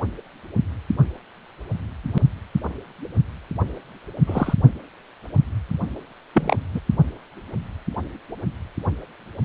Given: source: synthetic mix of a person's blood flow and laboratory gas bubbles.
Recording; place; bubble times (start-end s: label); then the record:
Doppler ultrasound of blood flow; precordium
4.26-4.54 s: bubbles
6.34-6.56 s: bubbles
6.75-6.80 s: bubbles
From the record:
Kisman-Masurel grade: 123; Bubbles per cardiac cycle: 1 to 2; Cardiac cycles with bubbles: 10 to 50%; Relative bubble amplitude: loud (0.450 to 0.775); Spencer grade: 2 (many but less than half of the cardiac periods contain bubble signals, singularly or in groups); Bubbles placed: only in the low amplitude regions of the cardiac cycle